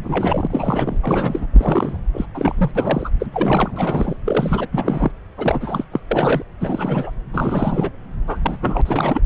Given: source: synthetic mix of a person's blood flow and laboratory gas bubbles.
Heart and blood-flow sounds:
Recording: Doppler ultrasound of blood flow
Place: subclavian vein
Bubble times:
0.03-0.47 s: bubbles
0.50-0.96 s: bubbles
1.01-1.46 s: bubbles
1.53-1.99 s: bubbles
2.14-2.26 s: bubbles
2.34-2.71 s: bubbles
2.75-3.10 s: bubbles
3.20-4.17 s: bubbles
4.25-4.67 s: bubbles
4.72-5.12 s: bubbles
5.38-5.84 s: bubbles
5.92-6.00 s: bubbles
6.10-6.42 s: bubbles
6.60-7.11 s: bubbles
7.31-7.91 s: bubbles
8.27-8.39 s: bubbles
8.42-8.57 s: bubbles
8.60-8.81 s: bubbles
8.85-9.21 s: bubbles
From the record:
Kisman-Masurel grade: 342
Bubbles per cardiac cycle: rolling drumbeat, 9 or more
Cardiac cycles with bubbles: 100%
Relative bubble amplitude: moderate (0.250 to 0.450)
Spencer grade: 3 (all of the cardiac periods contain showers or single bubble signals, but not dominating or overriding the cardiac motion signals)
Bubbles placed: anywhere in the cardiac cycle

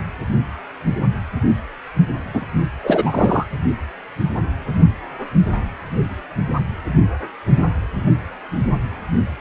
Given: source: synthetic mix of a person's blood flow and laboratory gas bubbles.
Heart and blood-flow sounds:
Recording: Doppler ultrasound of blood flow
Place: precordium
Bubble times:
2.33-2.46 s: bubbles
2.83-3.46 s: bubbles
From the record:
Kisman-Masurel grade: 213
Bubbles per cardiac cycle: several, 3 to 8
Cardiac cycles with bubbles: 1 to 10%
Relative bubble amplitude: loud (0.450 to 0.775)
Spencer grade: 1 (occasional bubble signal discernible with the cardiac motion signal, with majority of cardiac periods free of bubbles)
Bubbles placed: only in the low amplitude regions of the cardiac cycle

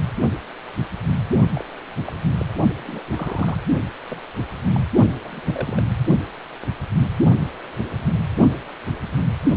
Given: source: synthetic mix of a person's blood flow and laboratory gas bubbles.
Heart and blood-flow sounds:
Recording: Doppler ultrasound of blood flow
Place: precordium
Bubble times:
1.55-1.65 s: bubbles
2.07-2.15 s: bubbles
2.38-2.46 s: bubbles
2.86-3.02 s: bubbles
3.11-3.58 s: bubbles
4.10-4.20 s: bubbles
4.73-4.83 s: bubbles
5.24-5.40 s: bubbles
5.47-5.83 s: bubbles
From the record:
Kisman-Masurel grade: 221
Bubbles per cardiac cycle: several, 3 to 8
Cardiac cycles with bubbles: 10 to 50%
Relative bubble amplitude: barely perceptible (0.100 to 0.250)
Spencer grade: 2 (many but less than half of the cardiac periods contain bubble signals, singularly or in groups)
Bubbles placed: only in the low amplitude regions of the cardiac cycle

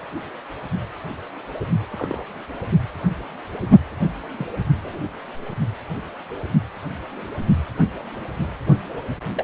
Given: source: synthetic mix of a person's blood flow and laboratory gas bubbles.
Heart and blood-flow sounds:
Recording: Doppler ultrasound of blood flow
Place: precordium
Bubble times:
1.60-1.65 s: bubbles
1.92-2.23 s: bubbles
3.61-3.67 s: bubbles
4.38-4.47 s: bubbles
4.81-4.98 s: bubbles
9.34-9.44 s: bubbles
From the record:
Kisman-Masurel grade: 121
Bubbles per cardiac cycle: 1 to 2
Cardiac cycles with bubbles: 10 to 50%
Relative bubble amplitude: barely perceptible (0.100 to 0.250)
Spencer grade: 2 (many but less than half of the cardiac periods contain bubble signals, singularly or in groups)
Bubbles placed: only in the low amplitude regions of the cardiac cycle

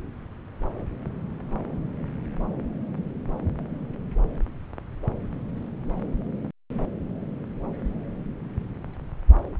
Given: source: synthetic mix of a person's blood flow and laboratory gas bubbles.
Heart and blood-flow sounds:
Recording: Doppler ultrasound of blood flow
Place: subclavian vein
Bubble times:
no bubbles
From the record:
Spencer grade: 0 (complete lack of bubble signals)

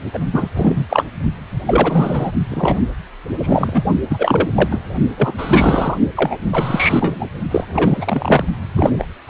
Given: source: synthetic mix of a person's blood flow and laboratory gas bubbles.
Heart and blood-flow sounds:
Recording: Doppler ultrasound of blood flow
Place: precordium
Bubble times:
0.13-0.19 s: bubbles
0.33-0.49 s: bubbles
0.55-1.05 s: bubbles
1.67-2.31 s: bubbles
2.48-2.81 s: bubbles
3.43-3.85 s: bubbles
4.09-4.49 s: bubbles
4.55-4.81 s: bubbles
5.17-5.34 s: bubbles
5.38-5.97 s: bubbles
6.16-6.36 s: bubbles
6.51-7.26 s: bubbles
7.50-8.44 s: bubbles
8.75-9.07 s: bubbles
9.27-9.30 s: bubbles
From the record:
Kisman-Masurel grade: 343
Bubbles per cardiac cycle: rolling drumbeat, 9 or more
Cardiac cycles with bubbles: 100%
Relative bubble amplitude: loud (0.450 to 0.775)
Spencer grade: 3 (all of the cardiac periods contain showers or single bubble signals, but not dominating or overriding the cardiac motion signals)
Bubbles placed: only in the low amplitude regions of the cardiac cycle

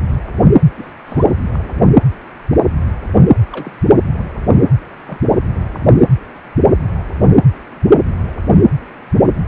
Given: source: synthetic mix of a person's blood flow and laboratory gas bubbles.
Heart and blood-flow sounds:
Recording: Doppler ultrasound of blood flow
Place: precordium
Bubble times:
0.77-0.92 s: bubbles
1.06-1.25 s: bubbles
1.53-1.57 s: bubbles
1.64-1.88 s: bubbles
3.52-3.71 s: bubbles
5.07-5.19 s: bubbles
5.28-5.37 s: bubbles
From the record:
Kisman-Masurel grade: 121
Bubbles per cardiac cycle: 1 to 2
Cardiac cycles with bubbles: 10 to 50%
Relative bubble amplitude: barely perceptible (0.100 to 0.250)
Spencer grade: 2 (many but less than half of the cardiac periods contain bubble signals, singularly or in groups)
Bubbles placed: anywhere in the cardiac cycle

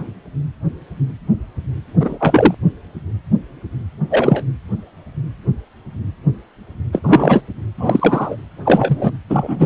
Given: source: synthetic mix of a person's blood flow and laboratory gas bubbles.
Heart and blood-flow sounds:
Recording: Doppler ultrasound of blood flow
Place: precordium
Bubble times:
0.00-0.02 s: bubbles
2.00-2.54 s: bubbles
4.10-4.44 s: bubbles
6.92-7.01 s: bubbles
7.04-7.42 s: bubbles
7.78-8.36 s: bubbles
8.65-9.11 s: bubbles
9.29-9.66 s: bubbles
From the record:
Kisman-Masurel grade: 223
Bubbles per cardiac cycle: several, 3 to 8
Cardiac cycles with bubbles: 10 to 50%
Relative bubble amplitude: loud (0.450 to 0.775)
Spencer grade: 2 (many but less than half of the cardiac periods contain bubble signals, singularly or in groups)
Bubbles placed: anywhere in the cardiac cycle

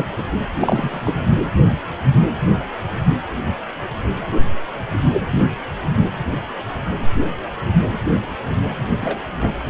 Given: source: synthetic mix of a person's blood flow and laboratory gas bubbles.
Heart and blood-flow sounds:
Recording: Doppler ultrasound of blood flow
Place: precordium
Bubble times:
0.00-0.06 s: bubbles
0.17-0.22 s: bubbles
0.60-1.28 s: bubbles
9.01-9.22 s: bubbles
9.42-9.53 s: bubbles
From the record:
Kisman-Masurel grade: 222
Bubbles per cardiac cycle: several, 3 to 8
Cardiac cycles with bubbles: 10 to 50%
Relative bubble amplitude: moderate (0.250 to 0.450)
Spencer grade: 2 (many but less than half of the cardiac periods contain bubble signals, singularly or in groups)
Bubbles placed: anywhere in the cardiac cycle

